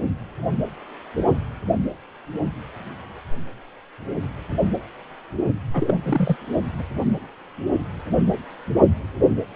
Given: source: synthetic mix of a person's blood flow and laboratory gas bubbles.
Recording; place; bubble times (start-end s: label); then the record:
Doppler ultrasound of blood flow; precordium
5.74-5.99 s: bubbles
6.03-6.37 s: bubbles
6.78-6.83 s: bubbles
From the record:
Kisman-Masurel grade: 212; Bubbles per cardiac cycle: several, 3 to 8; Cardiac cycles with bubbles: 1 to 10%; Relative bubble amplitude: moderate (0.250 to 0.450); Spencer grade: 1 (occasional bubble signal discernible with the cardiac motion signal, with majority of cardiac periods free of bubbles); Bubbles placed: only in the low amplitude regions of the cardiac cycle